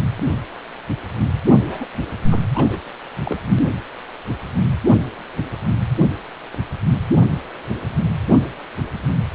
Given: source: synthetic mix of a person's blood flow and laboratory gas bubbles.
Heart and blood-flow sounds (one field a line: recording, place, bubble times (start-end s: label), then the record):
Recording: Doppler ultrasound of blood flow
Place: precordium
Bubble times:
1.67-1.86 s: bubbles
2.28-2.42 s: bubbles
2.54-2.80 s: bubbles
3.23-3.38 s: bubbles
From the record:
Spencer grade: 1 (occasional bubble signal discernible with the cardiac motion signal, with majority of cardiac periods free of bubbles)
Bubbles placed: only in the low amplitude regions of the cardiac cycle